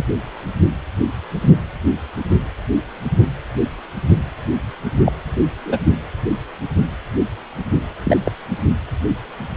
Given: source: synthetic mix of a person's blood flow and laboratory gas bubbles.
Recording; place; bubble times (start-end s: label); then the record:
Doppler ultrasound of blood flow; precordium
0.00-0.05 s: bubbles
5.05-5.12 s: bubbles
5.65-5.78 s: bubbles
8.04-8.17 s: bubbles
8.23-8.31 s: bubbles
From the record:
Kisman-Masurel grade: 122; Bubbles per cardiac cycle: 1 to 2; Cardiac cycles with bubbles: 10 to 50%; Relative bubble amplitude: moderate (0.250 to 0.450); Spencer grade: 2 (many but less than half of the cardiac periods contain bubble signals, singularly or in groups); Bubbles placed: anywhere in the cardiac cycle